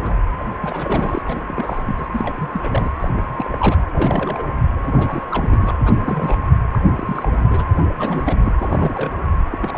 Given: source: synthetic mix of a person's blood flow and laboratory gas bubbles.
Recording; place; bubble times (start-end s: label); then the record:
Doppler ultrasound of blood flow; precordium
0.00-0.15 s: bubbles
0.39-0.44 s: bubbles
0.62-1.22 s: bubbles
1.25-1.42 s: bubbles
1.47-2.08 s: bubbles
2.12-2.49 s: bubbles
2.53-2.90 s: bubbles
2.99-3.10 s: bubbles
3.15-3.31 s: bubbles
3.38-3.81 s: bubbles
3.93-4.50 s: bubbles
4.83-5.24 s: bubbles
5.30-5.74 s: bubbles
5.85-6.52 s: bubbles
6.72-6.79 s: bubbles
6.88-7.45 s: bubbles
7.50-7.68 s: bubbles
7.98-8.38 s: bubbles
8.41-8.53 s: bubbles
8.58-9.12 s: bubbles
9.51-9.58 s: bubbles
9.62-9.78 s: bubbles
From the record:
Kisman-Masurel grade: 332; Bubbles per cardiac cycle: rolling drumbeat, 9 or more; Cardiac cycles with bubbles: 50 to 99%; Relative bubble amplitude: moderate (0.250 to 0.450); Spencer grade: 3 (all of the cardiac periods contain showers or single bubble signals, but not dominating or overriding the cardiac motion signals); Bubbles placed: anywhere in the cardiac cycle